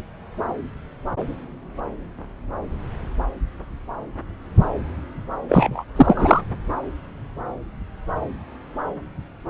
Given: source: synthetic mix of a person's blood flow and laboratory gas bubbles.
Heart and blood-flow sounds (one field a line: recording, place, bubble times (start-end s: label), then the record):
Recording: Doppler ultrasound of blood flow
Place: subclavian vein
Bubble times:
5.49-5.85 s: bubbles
5.96-6.42 s: bubbles
From the record:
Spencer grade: 1 (occasional bubble signal discernible with the cardiac motion signal, with majority of cardiac periods free of bubbles)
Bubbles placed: anywhere in the cardiac cycle